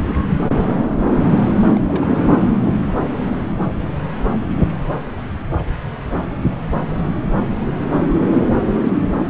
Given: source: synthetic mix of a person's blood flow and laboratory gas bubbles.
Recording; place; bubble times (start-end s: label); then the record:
Doppler ultrasound of blood flow; subclavian vein
0.38-0.43 s: bubbles
0.59-0.66 s: bubbles
1.68-2.08 s: bubbles
8.32-8.40 s: bubbles
9.24-9.30 s: bubbles
From the record:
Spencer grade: 2 (many but less than half of the cardiac periods contain bubble signals, singularly or in groups); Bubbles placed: anywhere in the cardiac cycle